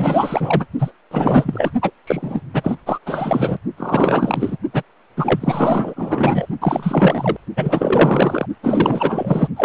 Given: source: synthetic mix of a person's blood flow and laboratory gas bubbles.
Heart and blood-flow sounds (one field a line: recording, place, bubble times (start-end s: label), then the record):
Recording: Doppler ultrasound of blood flow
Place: precordium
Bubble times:
0.00-0.67 s: bubbles
0.78-0.92 s: bubbles
1.11-1.72 s: bubbles
1.82-1.91 s: bubbles
2.06-2.41 s: bubbles
2.53-2.75 s: bubbles
2.86-2.99 s: bubbles
3.06-3.57 s: bubbles
3.76-4.57 s: bubbles
4.73-4.83 s: bubbles
5.17-6.46 s: bubbles
6.61-7.37 s: bubbles
7.56-8.46 s: bubbles
8.62-9.48 s: bubbles
9.56-9.65 s: bubbles
From the record:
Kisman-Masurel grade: 444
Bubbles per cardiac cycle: continuous sound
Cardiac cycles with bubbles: 100%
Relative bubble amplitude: maximal (0.775 to 0.999)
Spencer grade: 4 (maximum detectable bubble signal sounding continuously throughout systole and diastole of every cardiac period, and overriding the amplitude of the normal cardiac signals)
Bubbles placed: only in the low amplitude regions of the cardiac cycle